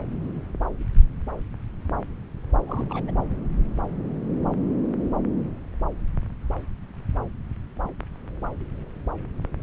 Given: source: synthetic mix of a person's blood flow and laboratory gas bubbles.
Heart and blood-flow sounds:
Doppler ultrasound of blood flow; subclavian vein
2.67-2.85 s: bubbles
2.89-3.04 s: bubbles
3.07-3.11 s: bubbles
From the record:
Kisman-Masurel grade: 211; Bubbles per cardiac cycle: several, 3 to 8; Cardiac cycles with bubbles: 1 to 10%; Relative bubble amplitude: barely perceptible (0.100 to 0.250); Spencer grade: 1 (occasional bubble signal discernible with the cardiac motion signal, with majority of cardiac periods free of bubbles); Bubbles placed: anywhere in the cardiac cycle

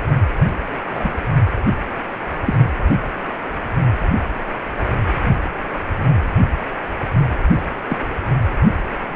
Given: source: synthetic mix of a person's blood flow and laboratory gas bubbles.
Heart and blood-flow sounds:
Doppler ultrasound of blood flow; precordium
0.93-1.13 s: bubbles
2.46-2.56 s: bubbles
2.59-2.69 s: bubbles
7.89-7.97 s: bubbles
From the record:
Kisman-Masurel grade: 123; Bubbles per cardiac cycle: 1 to 2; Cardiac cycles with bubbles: 10 to 50%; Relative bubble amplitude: loud (0.450 to 0.775); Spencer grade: 2 (many but less than half of the cardiac periods contain bubble signals, singularly or in groups); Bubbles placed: anywhere in the cardiac cycle

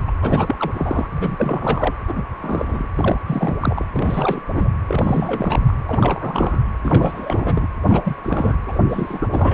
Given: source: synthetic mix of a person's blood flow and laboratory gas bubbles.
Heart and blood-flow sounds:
Doppler ultrasound of blood flow; precordium
0.00-0.02 s: bubbles
0.07-0.12 s: bubbles
0.21-0.56 s: bubbles
0.58-1.07 s: bubbles
1.11-1.94 s: bubbles
2.08-2.23 s: bubbles
2.41-2.89 s: bubbles
2.96-3.17 s: bubbles
3.27-3.57 s: bubbles
3.60-3.85 s: bubbles
3.93-4.43 s: bubbles
4.54-4.68 s: bubbles
4.88-5.75 s: bubbles
5.88-6.63 s: bubbles
6.83-7.67 s: bubbles
7.86-8.16 s: bubbles
8.23-8.56 s: bubbles
8.66-8.79 s: bubbles
8.89-9.26 s: bubbles
9.29-9.54 s: bubbles
From the record:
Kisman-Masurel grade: 342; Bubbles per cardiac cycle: rolling drumbeat, 9 or more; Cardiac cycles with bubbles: 100%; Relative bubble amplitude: moderate (0.250 to 0.450); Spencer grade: 3 (all of the cardiac periods contain showers or single bubble signals, but not dominating or overriding the cardiac motion signals); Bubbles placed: anywhere in the cardiac cycle

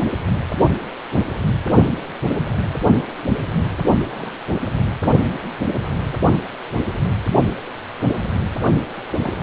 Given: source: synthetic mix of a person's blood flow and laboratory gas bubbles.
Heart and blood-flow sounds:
Doppler ultrasound of blood flow; precordium
4.11-4.36 s: bubbles
9.08-9.43 s: bubbles
From the record:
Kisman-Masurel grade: 121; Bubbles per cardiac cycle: 1 to 2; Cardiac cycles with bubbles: 10 to 50%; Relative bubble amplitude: barely perceptible (0.100 to 0.250); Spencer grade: 2 (many but less than half of the cardiac periods contain bubble signals, singularly or in groups); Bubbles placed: only in the low amplitude regions of the cardiac cycle

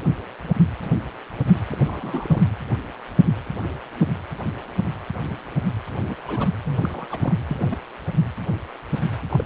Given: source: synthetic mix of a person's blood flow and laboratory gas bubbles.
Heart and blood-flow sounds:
Doppler ultrasound of blood flow; precordium
1.72-2.43 s: bubbles
6.04-6.15 s: bubbles
6.27-6.56 s: bubbles
6.65-7.08 s: bubbles
7.11-7.33 s: bubbles
7.48-7.78 s: bubbles
9.30-9.46 s: bubbles
From the record:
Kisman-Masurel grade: 221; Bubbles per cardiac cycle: several, 3 to 8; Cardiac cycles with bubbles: 10 to 50%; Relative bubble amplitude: barely perceptible (0.100 to 0.250); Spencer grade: 2 (many but less than half of the cardiac periods contain bubble signals, singularly or in groups); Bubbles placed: anywhere in the cardiac cycle

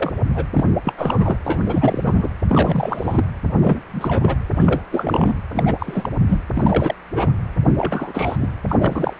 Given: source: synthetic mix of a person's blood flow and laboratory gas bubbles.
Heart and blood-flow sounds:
Doppler ultrasound of blood flow; precordium
0.00-0.13 s: bubbles
0.35-0.46 s: bubbles
0.52-0.65 s: bubbles
0.84-0.93 s: bubbles
0.98-1.38 s: bubbles
1.44-2.28 s: bubbles
2.49-3.25 s: bubbles
3.62-3.79 s: bubbles
3.90-4.38 s: bubbles
4.55-4.82 s: bubbles
4.92-5.35 s: bubbles
5.52-6.09 s: bubbles
6.28-6.40 s: bubbles
6.54-6.93 s: bubbles
7.14-7.32 s: bubbles
7.77-8.37 s: bubbles
8.40-8.49 s: bubbles
8.67-9.13 s: bubbles
From the record:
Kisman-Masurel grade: 342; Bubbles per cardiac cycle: rolling drumbeat, 9 or more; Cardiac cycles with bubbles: 100%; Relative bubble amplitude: moderate (0.250 to 0.450); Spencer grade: 3 (all of the cardiac periods contain showers or single bubble signals, but not dominating or overriding the cardiac motion signals); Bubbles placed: anywhere in the cardiac cycle

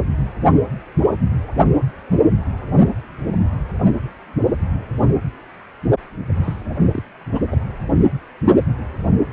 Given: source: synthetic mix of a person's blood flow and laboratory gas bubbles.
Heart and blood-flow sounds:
Doppler ultrasound of blood flow; precordium
6.43-6.63 s: bubbles
6.92-7.03 s: bubbles
7.32-7.40 s: bubbles
7.51-7.56 s: bubbles
From the record:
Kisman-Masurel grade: 221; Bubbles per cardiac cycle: several, 3 to 8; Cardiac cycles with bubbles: 10 to 50%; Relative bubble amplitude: barely perceptible (0.100 to 0.250); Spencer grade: 2 (many but less than half of the cardiac periods contain bubble signals, singularly or in groups); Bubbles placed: anywhere in the cardiac cycle

